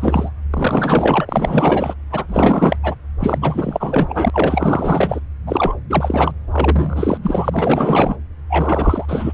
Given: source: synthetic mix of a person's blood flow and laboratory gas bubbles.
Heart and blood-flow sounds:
Doppler ultrasound of blood flow; subclavian vein
0.00-0.31 s: bubbles
0.50-1.94 s: bubbles
2.12-2.24 s: bubbles
2.28-2.77 s: bubbles
2.83-2.96 s: bubbles
3.19-4.30 s: bubbles
4.33-5.20 s: bubbles
5.46-5.74 s: bubbles
5.89-6.31 s: bubbles
6.50-7.17 s: bubbles
7.21-8.16 s: bubbles
8.49-9.05 s: bubbles
9.08-9.34 s: bubbles
From the record:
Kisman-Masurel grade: 444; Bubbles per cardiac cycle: continuous sound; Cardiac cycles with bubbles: 100%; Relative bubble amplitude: maximal (0.775 to 0.999); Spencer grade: 4 (maximum detectable bubble signal sounding continuously throughout systole and diastole of every cardiac period, and overriding the amplitude of the normal cardiac signals); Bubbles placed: anywhere in the cardiac cycle

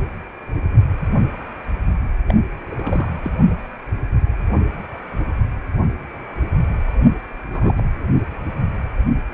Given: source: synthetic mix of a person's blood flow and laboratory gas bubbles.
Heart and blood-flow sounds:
Doppler ultrasound of blood flow; precordium
2.28-2.36 s: bubbles
2.71-3.12 s: bubbles
3.23-3.31 s: bubbles
7.53-7.84 s: bubbles
From the record:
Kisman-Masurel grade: 221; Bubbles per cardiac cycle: several, 3 to 8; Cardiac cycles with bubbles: 10 to 50%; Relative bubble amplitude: barely perceptible (0.100 to 0.250); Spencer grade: 2 (many but less than half of the cardiac periods contain bubble signals, singularly or in groups); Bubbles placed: only in the low amplitude regions of the cardiac cycle

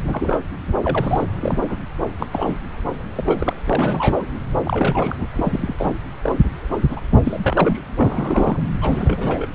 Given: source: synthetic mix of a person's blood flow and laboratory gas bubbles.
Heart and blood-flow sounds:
Doppler ultrasound of blood flow; subclavian vein
0.07-0.44 s: bubbles
0.82-1.25 s: bubbles
1.41-1.59 s: bubbles
1.61-1.79 s: bubbles
2.19-2.27 s: bubbles
2.32-2.58 s: bubbles
3.15-3.62 s: bubbles
3.66-4.25 s: bubbles
4.65-5.27 s: bubbles
5.33-5.93 s: bubbles
6.23-6.32 s: bubbles
6.89-7.00 s: bubbles
7.24-7.79 s: bubbles
7.96-8.60 s: bubbles
8.81-9.47 s: bubbles
From the record:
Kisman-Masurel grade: 242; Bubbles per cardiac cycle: several, 3 to 8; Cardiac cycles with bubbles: 100%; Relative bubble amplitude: moderate (0.250 to 0.450); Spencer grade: 3 (all of the cardiac periods contain showers or single bubble signals, but not dominating or overriding the cardiac motion signals); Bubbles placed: anywhere in the cardiac cycle

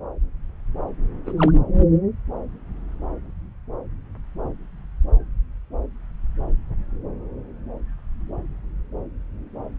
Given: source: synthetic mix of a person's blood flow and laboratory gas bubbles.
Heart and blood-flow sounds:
Doppler ultrasound of blood flow; subclavian vein
1.25-1.34 s: bubbles
1.37-1.52 s: bubbles
From the record:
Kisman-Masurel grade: 112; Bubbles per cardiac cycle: 1 to 2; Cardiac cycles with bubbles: 1 to 10%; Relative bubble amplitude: moderate (0.250 to 0.450); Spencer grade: 1 (occasional bubble signal discernible with the cardiac motion signal, with majority of cardiac periods free of bubbles); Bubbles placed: anywhere in the cardiac cycle

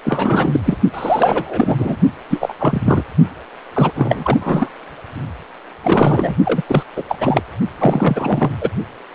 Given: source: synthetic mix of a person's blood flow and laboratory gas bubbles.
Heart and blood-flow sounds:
Doppler ultrasound of blood flow; precordium
0.04-0.60 s: bubbles
0.65-0.78 s: bubbles
0.93-1.76 s: bubbles
1.79-1.96 s: bubbles
2.30-2.54 s: bubbles
2.58-3.04 s: bubbles
3.74-3.91 s: bubbles
3.95-4.37 s: bubbles
4.40-4.71 s: bubbles
5.83-6.35 s: bubbles
6.45-6.62 s: bubbles
6.67-6.83 s: bubbles
6.96-7.03 s: bubbles
7.09-7.42 s: bubbles
7.78-8.51 s: bubbles
8.61-8.70 s: bubbles
From the record:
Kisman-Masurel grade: 343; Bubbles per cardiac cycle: rolling drumbeat, 9 or more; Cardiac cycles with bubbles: 100%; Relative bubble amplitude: loud (0.450 to 0.775); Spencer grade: 3 (all of the cardiac periods contain showers or single bubble signals, but not dominating or overriding the cardiac motion signals); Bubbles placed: only in the low amplitude regions of the cardiac cycle

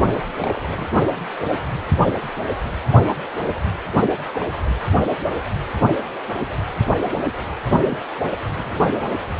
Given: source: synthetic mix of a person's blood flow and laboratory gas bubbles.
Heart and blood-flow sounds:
Doppler ultrasound of blood flow; precordium
0.38-0.88 s: bubbles
4.29-4.50 s: bubbles
7.84-7.98 s: bubbles
8.57-8.79 s: bubbles
From the record:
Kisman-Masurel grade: 121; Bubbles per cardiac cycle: 1 to 2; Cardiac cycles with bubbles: 10 to 50%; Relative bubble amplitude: barely perceptible (0.100 to 0.250); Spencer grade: 2 (many but less than half of the cardiac periods contain bubble signals, singularly or in groups); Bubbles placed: anywhere in the cardiac cycle

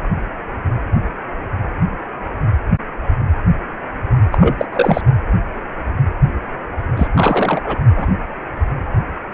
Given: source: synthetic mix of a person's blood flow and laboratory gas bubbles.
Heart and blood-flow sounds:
Doppler ultrasound of blood flow; precordium
4.32-4.38 s: bubbles
4.41-4.66 s: bubbles
4.73-5.01 s: bubbles
6.96-7.08 s: bubbles
7.14-7.78 s: bubbles
7.96-8.06 s: bubbles
From the record:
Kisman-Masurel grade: 223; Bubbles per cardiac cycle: several, 3 to 8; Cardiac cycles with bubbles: 10 to 50%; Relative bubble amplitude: loud (0.450 to 0.775); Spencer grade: 2 (many but less than half of the cardiac periods contain bubble signals, singularly or in groups); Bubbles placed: anywhere in the cardiac cycle

